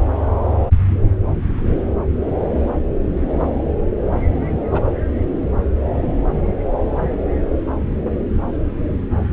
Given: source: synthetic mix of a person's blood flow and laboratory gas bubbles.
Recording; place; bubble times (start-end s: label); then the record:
Doppler ultrasound of blood flow; subclavian vein
4.71-4.82 s: bubbles
From the record:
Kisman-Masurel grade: 113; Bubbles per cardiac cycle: 1 to 2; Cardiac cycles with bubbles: 1 to 10%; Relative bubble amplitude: loud (0.450 to 0.775); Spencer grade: 1 (occasional bubble signal discernible with the cardiac motion signal, with majority of cardiac periods free of bubbles); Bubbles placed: anywhere in the cardiac cycle